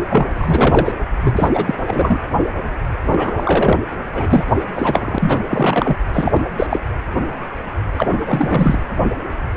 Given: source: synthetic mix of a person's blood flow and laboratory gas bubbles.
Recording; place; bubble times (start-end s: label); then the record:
Doppler ultrasound of blood flow; precordium
0.09-0.24 s: bubbles
0.37-0.95 s: bubbles
1.21-1.48 s: bubbles
1.53-1.75 s: bubbles
1.88-2.19 s: bubbles
3.11-3.79 s: bubbles
4.12-4.43 s: bubbles
4.75-5.39 s: bubbles
5.50-5.96 s: bubbles
6.13-6.31 s: bubbles
6.34-6.39 s: bubbles
6.56-6.67 s: bubbles
6.69-6.80 s: bubbles
7.97-8.79 s: bubbles
From the record:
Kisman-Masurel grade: 333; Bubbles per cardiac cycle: rolling drumbeat, 9 or more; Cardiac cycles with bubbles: 50 to 99%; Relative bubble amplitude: loud (0.450 to 0.775); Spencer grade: 3 (all of the cardiac periods contain showers or single bubble signals, but not dominating or overriding the cardiac motion signals); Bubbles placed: anywhere in the cardiac cycle